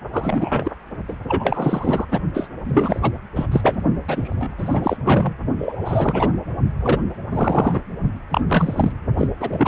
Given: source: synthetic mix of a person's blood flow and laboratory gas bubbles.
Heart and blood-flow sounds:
Doppler ultrasound of blood flow; precordium
0.12-0.73 s: bubbles
1.08-1.16 s: bubbles
1.27-2.05 s: bubbles
2.11-2.19 s: bubbles
2.33-2.49 s: bubbles
2.63-3.11 s: bubbles
3.35-3.46 s: bubbles
3.52-3.84 s: bubbles
4.08-4.97 s: bubbles
5.04-5.33 s: bubbles
5.58-6.33 s: bubbles
6.79-7.04 s: bubbles
7.31-7.81 s: bubbles
8.30-8.41 s: bubbles
8.48-8.92 s: bubbles
9.18-9.28 s: bubbles
9.40-9.68 s: bubbles
From the record:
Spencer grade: 3 (all of the cardiac periods contain showers or single bubble signals, but not dominating or overriding the cardiac motion signals); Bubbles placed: only in the low amplitude regions of the cardiac cycle

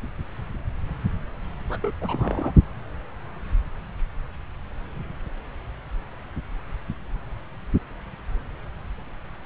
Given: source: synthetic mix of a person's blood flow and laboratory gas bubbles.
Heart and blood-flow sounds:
Doppler ultrasound of blood flow; subclavian vein
1.69-1.78 s: bubbles
1.82-1.93 s: bubbles
2.01-2.53 s: bubbles
From the record:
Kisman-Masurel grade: 211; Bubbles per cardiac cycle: several, 3 to 8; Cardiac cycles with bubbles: 1 to 10%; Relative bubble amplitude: barely perceptible (0.100 to 0.250); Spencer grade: 1 (occasional bubble signal discernible with the cardiac motion signal, with majority of cardiac periods free of bubbles); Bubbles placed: anywhere in the cardiac cycle

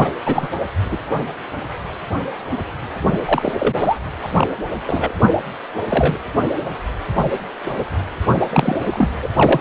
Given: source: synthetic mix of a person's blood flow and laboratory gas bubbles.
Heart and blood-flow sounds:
Doppler ultrasound of blood flow; precordium
0.00-0.11 s: bubbles
0.26-0.48 s: bubbles
0.91-0.98 s: bubbles
3.25-3.52 s: bubbles
3.59-3.74 s: bubbles
3.76-3.98 s: bubbles
4.22-4.29 s: bubbles
4.35-4.47 s: bubbles
4.87-5.12 s: bubbles
5.89-6.17 s: bubbles
8.52-8.78 s: bubbles
8.85-9.07 s: bubbles
9.22-9.29 s: bubbles
9.36-9.61 s: bubbles
From the record:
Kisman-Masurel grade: 233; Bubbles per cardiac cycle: several, 3 to 8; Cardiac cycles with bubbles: 50 to 99%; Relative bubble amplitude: loud (0.450 to 0.775); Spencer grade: 3 (all of the cardiac periods contain showers or single bubble signals, but not dominating or overriding the cardiac motion signals); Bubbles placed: anywhere in the cardiac cycle

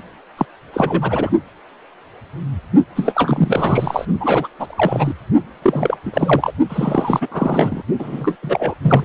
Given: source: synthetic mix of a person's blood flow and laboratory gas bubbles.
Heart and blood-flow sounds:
Doppler ultrasound of blood flow; precordium
0.37-0.46 s: bubbles
0.73-1.30 s: bubbles
2.96-4.05 s: bubbles
4.21-4.48 s: bubbles
4.59-5.13 s: bubbles
5.62-5.97 s: bubbles
6.05-6.52 s: bubbles
6.69-7.83 s: bubbles
7.99-8.36 s: bubbles
8.42-8.74 s: bubbles
8.82-9.05 s: bubbles
From the record:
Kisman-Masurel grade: 333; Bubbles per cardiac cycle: rolling drumbeat, 9 or more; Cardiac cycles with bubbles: 50 to 99%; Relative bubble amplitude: loud (0.450 to 0.775); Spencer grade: 3 (all of the cardiac periods contain showers or single bubble signals, but not dominating or overriding the cardiac motion signals); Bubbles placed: only in the low amplitude regions of the cardiac cycle

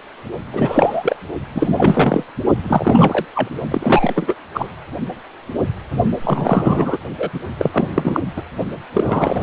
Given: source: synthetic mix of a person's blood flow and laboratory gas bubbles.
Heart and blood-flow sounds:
Doppler ultrasound of blood flow; precordium
0.52-1.16 s: bubbles
1.55-2.23 s: bubbles
2.63-3.25 s: bubbles
3.35-3.48 s: bubbles
3.71-4.36 s: bubbles
4.54-4.70 s: bubbles
6.24-6.97 s: bubbles
7.18-7.30 s: bubbles
7.33-7.40 s: bubbles
7.59-8.21 s: bubbles
8.36-8.43 s: bubbles
8.94-9.43 s: bubbles
From the record:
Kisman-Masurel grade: 333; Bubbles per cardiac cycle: rolling drumbeat, 9 or more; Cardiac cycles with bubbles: 50 to 99%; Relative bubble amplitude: loud (0.450 to 0.775); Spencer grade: 3 (all of the cardiac periods contain showers or single bubble signals, but not dominating or overriding the cardiac motion signals); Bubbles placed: only in the low amplitude regions of the cardiac cycle

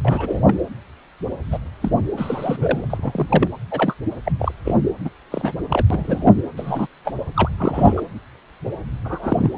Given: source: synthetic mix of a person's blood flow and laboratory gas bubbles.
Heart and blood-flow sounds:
Doppler ultrasound of blood flow; precordium
0.04-0.56 s: bubbles
1.51-1.58 s: bubbles
1.82-1.91 s: bubbles
2.17-2.85 s: bubbles
2.90-3.47 s: bubbles
3.70-3.94 s: bubbles
4.25-4.32 s: bubbles
4.39-4.52 s: bubbles
4.65-4.75 s: bubbles
5.04-5.09 s: bubbles
5.32-5.53 s: bubbles
5.69-5.85 s: bubbles
5.90-6.33 s: bubbles
6.57-6.87 s: bubbles
7.04-7.12 s: bubbles
7.34-7.50 s: bubbles
7.58-8.03 s: bubbles
9.04-9.51 s: bubbles
From the record:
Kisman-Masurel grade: 232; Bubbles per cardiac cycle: several, 3 to 8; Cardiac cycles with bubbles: 50 to 99%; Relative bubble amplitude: moderate (0.250 to 0.450); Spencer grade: 3 (all of the cardiac periods contain showers or single bubble signals, but not dominating or overriding the cardiac motion signals); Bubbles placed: anywhere in the cardiac cycle

